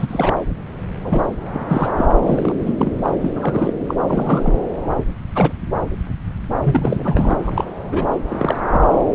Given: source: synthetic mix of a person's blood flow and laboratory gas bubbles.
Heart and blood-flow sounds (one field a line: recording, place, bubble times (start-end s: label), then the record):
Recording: Doppler ultrasound of blood flow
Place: subclavian vein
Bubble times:
0.00-0.35 s: bubbles
1.05-1.27 s: bubbles
1.53-1.92 s: bubbles
1.97-2.06 s: bubbles
2.22-2.55 s: bubbles
2.66-2.92 s: bubbles
3.02-3.10 s: bubbles
3.22-3.31 s: bubbles
3.35-3.73 s: bubbles
3.87-3.94 s: bubbles
4.07-4.53 s: bubbles
5.35-5.53 s: bubbles
6.64-7.34 s: bubbles
7.45-7.64 s: bubbles
7.84-8.07 s: bubbles
8.28-8.56 s: bubbles
8.72-8.85 s: bubbles
From the record:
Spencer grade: 3 (all of the cardiac periods contain showers or single bubble signals, but not dominating or overriding the cardiac motion signals)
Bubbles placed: anywhere in the cardiac cycle